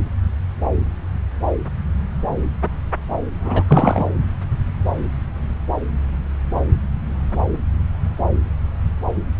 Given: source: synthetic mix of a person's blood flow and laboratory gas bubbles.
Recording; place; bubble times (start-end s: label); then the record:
Doppler ultrasound of blood flow; subclavian vein
3.43-3.63 s: bubbles
3.67-4.09 s: bubbles
From the record:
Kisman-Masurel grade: 213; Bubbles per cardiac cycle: several, 3 to 8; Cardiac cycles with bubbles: 1 to 10%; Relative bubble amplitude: loud (0.450 to 0.775); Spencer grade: 1 (occasional bubble signal discernible with the cardiac motion signal, with majority of cardiac periods free of bubbles); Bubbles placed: anywhere in the cardiac cycle